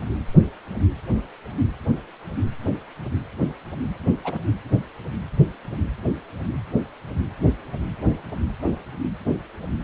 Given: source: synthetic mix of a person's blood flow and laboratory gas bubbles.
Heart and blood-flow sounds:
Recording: Doppler ultrasound of blood flow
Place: precordium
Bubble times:
4.24-4.42 s: bubbles
From the record:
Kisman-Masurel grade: 111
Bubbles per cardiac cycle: 1 to 2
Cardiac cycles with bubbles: 1 to 10%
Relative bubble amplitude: barely perceptible (0.100 to 0.250)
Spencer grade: 1 (occasional bubble signal discernible with the cardiac motion signal, with majority of cardiac periods free of bubbles)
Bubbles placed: anywhere in the cardiac cycle

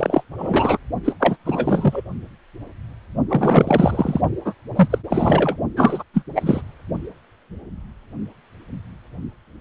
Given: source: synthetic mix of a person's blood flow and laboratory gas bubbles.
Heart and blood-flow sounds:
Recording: Doppler ultrasound of blood flow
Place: precordium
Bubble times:
0.00-0.24 s: bubbles
0.38-0.78 s: bubbles
1.04-1.13 s: bubbles
1.20-1.36 s: bubbles
1.45-2.03 s: bubbles
3.29-4.21 s: bubbles
4.45-4.54 s: bubbles
4.75-4.99 s: bubbles
5.10-5.57 s: bubbles
5.76-6.03 s: bubbles
6.13-6.24 s: bubbles
6.35-6.61 s: bubbles
From the record:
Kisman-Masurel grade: 333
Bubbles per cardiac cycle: rolling drumbeat, 9 or more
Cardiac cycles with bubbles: 50 to 99%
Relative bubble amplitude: loud (0.450 to 0.775)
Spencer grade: 3 (all of the cardiac periods contain showers or single bubble signals, but not dominating or overriding the cardiac motion signals)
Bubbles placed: only in the low amplitude regions of the cardiac cycle

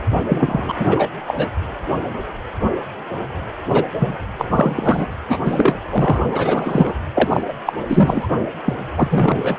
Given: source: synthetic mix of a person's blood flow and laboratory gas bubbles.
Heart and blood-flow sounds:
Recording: Doppler ultrasound of blood flow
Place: precordium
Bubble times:
0.29-0.73 s: bubbles
0.78-1.07 s: bubbles
1.26-1.34 s: bubbles
1.37-1.48 s: bubbles
3.70-3.85 s: bubbles
4.00-4.17 s: bubbles
4.38-4.46 s: bubbles
4.54-5.07 s: bubbles
5.12-5.15 s: bubbles
5.29-5.40 s: bubbles
5.45-5.74 s: bubbles
5.90-6.21 s: bubbles
6.32-6.94 s: bubbles
7.15-7.43 s: bubbles
7.48-7.53 s: bubbles
7.66-7.73 s: bubbles
7.88-8.28 s: bubbles
8.64-8.74 s: bubbles
8.96-9.09 s: bubbles
9.11-9.59 s: bubbles
From the record:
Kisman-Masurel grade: 333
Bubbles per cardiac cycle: rolling drumbeat, 9 or more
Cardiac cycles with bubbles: 50 to 99%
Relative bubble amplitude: loud (0.450 to 0.775)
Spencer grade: 3 (all of the cardiac periods contain showers or single bubble signals, but not dominating or overriding the cardiac motion signals)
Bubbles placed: anywhere in the cardiac cycle

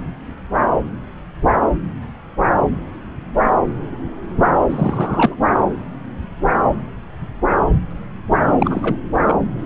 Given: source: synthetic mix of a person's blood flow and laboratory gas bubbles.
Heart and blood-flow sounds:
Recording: Doppler ultrasound of blood flow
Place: subclavian vein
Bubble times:
4.69-5.36 s: bubbles
8.60-8.96 s: bubbles
9.27-9.36 s: bubbles
From the record:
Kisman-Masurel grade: 222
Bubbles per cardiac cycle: several, 3 to 8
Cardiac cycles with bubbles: 10 to 50%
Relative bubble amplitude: moderate (0.250 to 0.450)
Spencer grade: 2 (many but less than half of the cardiac periods contain bubble signals, singularly or in groups)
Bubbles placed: anywhere in the cardiac cycle

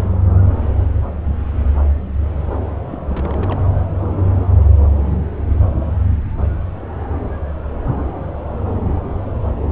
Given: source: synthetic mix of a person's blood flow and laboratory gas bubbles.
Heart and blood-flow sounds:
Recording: Doppler ultrasound of blood flow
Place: subclavian vein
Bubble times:
2.06-2.12 s: bubbles
2.87-3.00 s: bubbles
3.08-3.60 s: bubbles
From the record:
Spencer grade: 1 (occasional bubble signal discernible with the cardiac motion signal, with majority of cardiac periods free of bubbles)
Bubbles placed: anywhere in the cardiac cycle

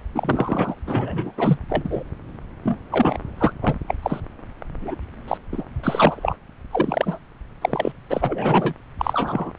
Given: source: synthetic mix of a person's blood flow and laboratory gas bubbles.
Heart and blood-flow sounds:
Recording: Doppler ultrasound of blood flow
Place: subclavian vein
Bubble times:
0.15-0.74 s: bubbles
0.86-1.32 s: bubbles
1.37-1.58 s: bubbles
1.70-2.04 s: bubbles
2.64-2.80 s: bubbles
2.91-3.19 s: bubbles
3.38-3.52 s: bubbles
3.61-3.75 s: bubbles
3.87-3.95 s: bubbles
4.03-4.21 s: bubbles
4.81-4.95 s: bubbles
5.28-5.37 s: bubbles
5.52-5.65 s: bubbles
5.83-6.37 s: bubbles
6.71-7.18 s: bubbles
7.61-7.92 s: bubbles
8.10-8.74 s: bubbles
8.99-9.51 s: bubbles
From the record:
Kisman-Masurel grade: 243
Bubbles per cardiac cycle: several, 3 to 8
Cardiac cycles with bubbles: 100%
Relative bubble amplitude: loud (0.450 to 0.775)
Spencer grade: 3 (all of the cardiac periods contain showers or single bubble signals, but not dominating or overriding the cardiac motion signals)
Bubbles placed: anywhere in the cardiac cycle

